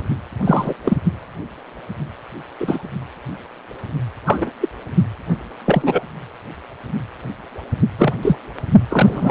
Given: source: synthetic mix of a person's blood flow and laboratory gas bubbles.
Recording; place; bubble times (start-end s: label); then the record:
Doppler ultrasound of blood flow; precordium
0.45-0.74 s: bubbles
0.84-0.97 s: bubbles
2.60-2.90 s: bubbles
4.26-4.52 s: bubbles
4.61-4.69 s: bubbles
5.65-6.04 s: bubbles
7.98-8.13 s: bubbles
8.21-8.36 s: bubbles
8.89-9.31 s: bubbles
From the record:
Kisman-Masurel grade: 233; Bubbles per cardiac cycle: several, 3 to 8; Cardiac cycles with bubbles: 50 to 99%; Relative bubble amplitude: loud (0.450 to 0.775); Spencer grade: 3 (all of the cardiac periods contain showers or single bubble signals, but not dominating or overriding the cardiac motion signals); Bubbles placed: only in the low amplitude regions of the cardiac cycle